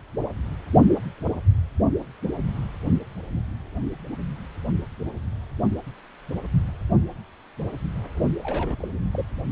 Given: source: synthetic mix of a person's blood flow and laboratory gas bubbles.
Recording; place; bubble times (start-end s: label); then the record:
Doppler ultrasound of blood flow; precordium
8.39-8.88 s: bubbles
9.12-9.23 s: bubbles
From the record:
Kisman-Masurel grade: 211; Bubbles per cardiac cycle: several, 3 to 8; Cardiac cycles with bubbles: 1 to 10%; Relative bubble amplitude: barely perceptible (0.100 to 0.250); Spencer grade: 1 (occasional bubble signal discernible with the cardiac motion signal, with majority of cardiac periods free of bubbles); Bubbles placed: only in the low amplitude regions of the cardiac cycle